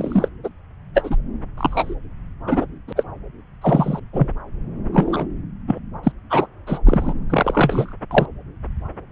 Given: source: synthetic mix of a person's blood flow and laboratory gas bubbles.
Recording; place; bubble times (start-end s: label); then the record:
Doppler ultrasound of blood flow; subclavian vein
0.00-0.28 s: bubbles
0.43-0.49 s: bubbles
0.94-1.16 s: bubbles
1.57-1.95 s: bubbles
2.47-2.66 s: bubbles
2.88-2.93 s: bubbles
2.96-3.04 s: bubbles
3.61-3.99 s: bubbles
4.13-4.28 s: bubbles
4.93-5.25 s: bubbles
5.68-5.80 s: bubbles
6.03-6.12 s: bubbles
6.30-6.47 s: bubbles
6.67-6.79 s: bubbles
6.86-7.14 s: bubbles
7.30-7.92 s: bubbles
8.11-8.25 s: bubbles
From the record:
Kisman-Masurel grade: 233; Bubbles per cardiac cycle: several, 3 to 8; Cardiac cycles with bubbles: 50 to 99%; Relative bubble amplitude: loud (0.450 to 0.775); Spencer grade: 3 (all of the cardiac periods contain showers or single bubble signals, but not dominating or overriding the cardiac motion signals); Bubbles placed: anywhere in the cardiac cycle